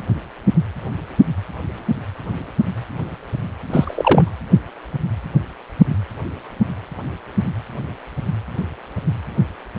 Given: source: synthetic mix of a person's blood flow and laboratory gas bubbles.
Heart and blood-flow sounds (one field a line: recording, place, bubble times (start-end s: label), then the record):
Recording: Doppler ultrasound of blood flow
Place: precordium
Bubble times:
3.70-4.30 s: bubbles
From the record:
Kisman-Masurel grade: 223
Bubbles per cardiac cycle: several, 3 to 8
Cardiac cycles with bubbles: 10 to 50%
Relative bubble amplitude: loud (0.450 to 0.775)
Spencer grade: 2 (many but less than half of the cardiac periods contain bubble signals, singularly or in groups)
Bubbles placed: anywhere in the cardiac cycle